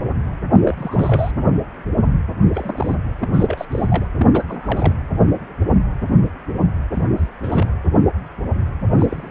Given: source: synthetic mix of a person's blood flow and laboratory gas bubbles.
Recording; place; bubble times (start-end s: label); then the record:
Doppler ultrasound of blood flow; precordium
0.51-0.59 s: bubbles
0.62-1.31 s: bubbles
2.54-2.96 s: bubbles
3.19-3.29 s: bubbles
3.33-3.65 s: bubbles
3.71-4.06 s: bubbles
4.18-4.28 s: bubbles
4.33-4.46 s: bubbles
4.49-4.93 s: bubbles
6.93-7.03 s: bubbles
7.17-7.27 s: bubbles
7.43-7.70 s: bubbles
8.98-9.31 s: bubbles
From the record:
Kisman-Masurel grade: 232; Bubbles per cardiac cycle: several, 3 to 8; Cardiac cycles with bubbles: 50 to 99%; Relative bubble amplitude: moderate (0.250 to 0.450); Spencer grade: 3 (all of the cardiac periods contain showers or single bubble signals, but not dominating or overriding the cardiac motion signals); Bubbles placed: anywhere in the cardiac cycle